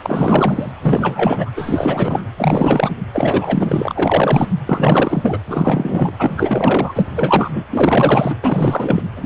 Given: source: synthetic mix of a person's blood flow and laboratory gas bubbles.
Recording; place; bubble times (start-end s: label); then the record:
Doppler ultrasound of blood flow; precordium
0.00-0.72 s: bubbles
0.82-1.51 s: bubbles
1.55-2.23 s: bubbles
2.36-2.90 s: bubbles
3.13-4.48 s: bubbles
4.66-5.38 s: bubbles
5.47-6.12 s: bubbles
6.18-7.05 s: bubbles
7.15-7.65 s: bubbles
7.70-8.36 s: bubbles
8.43-9.02 s: bubbles
9.16-9.26 s: bubbles
From the record:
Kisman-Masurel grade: 444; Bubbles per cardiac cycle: continuous sound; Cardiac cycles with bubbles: 100%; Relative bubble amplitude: maximal (0.775 to 0.999); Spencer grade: 4 (maximum detectable bubble signal sounding continuously throughout systole and diastole of every cardiac period, and overriding the amplitude of the normal cardiac signals); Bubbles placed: anywhere in the cardiac cycle